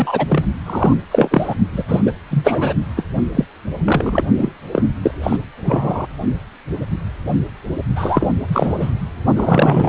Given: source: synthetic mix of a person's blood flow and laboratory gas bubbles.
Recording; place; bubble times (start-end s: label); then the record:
Doppler ultrasound of blood flow; precordium
0.00-0.27 s: bubbles
0.29-0.43 s: bubbles
0.66-0.94 s: bubbles
1.11-1.55 s: bubbles
1.73-1.83 s: bubbles
1.88-2.12 s: bubbles
2.30-2.74 s: bubbles
2.96-3.04 s: bubbles
3.35-3.44 s: bubbles
3.84-4.24 s: bubbles
4.37-4.53 s: bubbles
4.72-4.83 s: bubbles
5.03-5.12 s: bubbles
5.23-5.37 s: bubbles
5.65-6.07 s: bubbles
7.96-8.28 s: bubbles
8.52-8.94 s: bubbles
9.35-9.89 s: bubbles
From the record:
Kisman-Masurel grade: 233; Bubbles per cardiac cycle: several, 3 to 8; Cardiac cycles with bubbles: 50 to 99%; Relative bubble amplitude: loud (0.450 to 0.775); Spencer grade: 3 (all of the cardiac periods contain showers or single bubble signals, but not dominating or overriding the cardiac motion signals); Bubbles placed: only in the low amplitude regions of the cardiac cycle